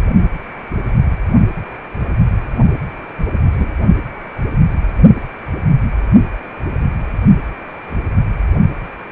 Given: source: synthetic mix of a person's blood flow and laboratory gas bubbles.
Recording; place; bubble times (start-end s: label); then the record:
Doppler ultrasound of blood flow; precordium
3.53-3.71 s: bubbles
From the record:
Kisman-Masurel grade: 112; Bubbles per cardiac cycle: 1 to 2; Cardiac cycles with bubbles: 1 to 10%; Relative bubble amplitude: moderate (0.250 to 0.450); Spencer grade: 1 (occasional bubble signal discernible with the cardiac motion signal, with majority of cardiac periods free of bubbles); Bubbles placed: only in the low amplitude regions of the cardiac cycle